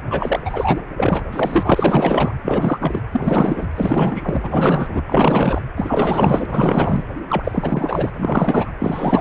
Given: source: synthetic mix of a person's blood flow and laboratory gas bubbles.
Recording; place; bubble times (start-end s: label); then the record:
Doppler ultrasound of blood flow; precordium
0.10-0.81 s: bubbles
0.97-1.23 s: bubbles
1.32-2.33 s: bubbles
2.42-3.02 s: bubbles
3.11-3.68 s: bubbles
3.75-5.02 s: bubbles
5.07-5.62 s: bubbles
5.77-6.46 s: bubbles
6.49-7.05 s: bubbles
7.29-8.10 s: bubbles
8.13-8.71 s: bubbles
8.79-9.21 s: bubbles
From the record:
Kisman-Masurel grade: 444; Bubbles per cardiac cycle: continuous sound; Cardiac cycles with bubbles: 100%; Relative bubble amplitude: maximal (0.775 to 0.999); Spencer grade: 4 (maximum detectable bubble signal sounding continuously throughout systole and diastole of every cardiac period, and overriding the amplitude of the normal cardiac signals); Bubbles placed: anywhere in the cardiac cycle